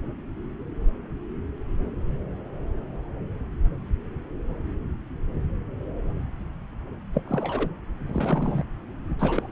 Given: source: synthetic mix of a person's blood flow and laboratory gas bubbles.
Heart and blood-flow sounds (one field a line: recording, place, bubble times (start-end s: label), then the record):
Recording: Doppler ultrasound of blood flow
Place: subclavian vein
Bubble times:
7.14-7.23 s: bubbles
7.28-7.69 s: bubbles
8.06-8.63 s: bubbles
9.19-9.52 s: bubbles
From the record:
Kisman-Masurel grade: 222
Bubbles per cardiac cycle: several, 3 to 8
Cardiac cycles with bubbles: 10 to 50%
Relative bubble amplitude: moderate (0.250 to 0.450)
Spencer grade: 2 (many but less than half of the cardiac periods contain bubble signals, singularly or in groups)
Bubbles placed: anywhere in the cardiac cycle